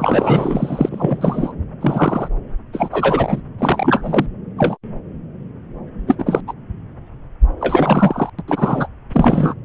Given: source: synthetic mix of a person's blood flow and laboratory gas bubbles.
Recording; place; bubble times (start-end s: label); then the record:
Doppler ultrasound of blood flow; subclavian vein
0.00-1.52 s: bubbles
1.81-2.29 s: bubbles
2.73-3.42 s: bubbles
3.58-4.26 s: bubbles
4.58-4.77 s: bubbles
6.07-6.15 s: bubbles
6.18-6.40 s: bubbles
6.47-6.53 s: bubbles
7.60-8.30 s: bubbles
8.38-8.42 s: bubbles
8.47-8.88 s: bubbles
9.13-9.54 s: bubbles
From the record:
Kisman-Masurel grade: 233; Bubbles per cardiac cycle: several, 3 to 8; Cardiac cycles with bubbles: 50 to 99%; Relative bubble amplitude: loud (0.450 to 0.775); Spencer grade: 3 (all of the cardiac periods contain showers or single bubble signals, but not dominating or overriding the cardiac motion signals); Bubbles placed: anywhere in the cardiac cycle